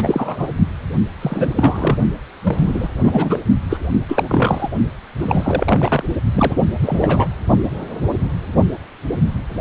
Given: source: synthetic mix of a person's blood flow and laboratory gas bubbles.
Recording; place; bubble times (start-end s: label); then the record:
Doppler ultrasound of blood flow; precordium
0.00-0.54 s: bubbles
1.21-1.50 s: bubbles
1.56-1.98 s: bubbles
2.43-2.89 s: bubbles
2.98-3.40 s: bubbles
3.69-3.78 s: bubbles
4.08-4.25 s: bubbles
4.29-4.68 s: bubbles
5.19-6.03 s: bubbles
6.33-6.60 s: bubbles
6.82-7.28 s: bubbles
From the record:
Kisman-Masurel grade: 333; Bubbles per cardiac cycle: rolling drumbeat, 9 or more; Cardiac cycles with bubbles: 50 to 99%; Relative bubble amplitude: loud (0.450 to 0.775); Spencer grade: 3 (all of the cardiac periods contain showers or single bubble signals, but not dominating or overriding the cardiac motion signals); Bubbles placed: only in the low amplitude regions of the cardiac cycle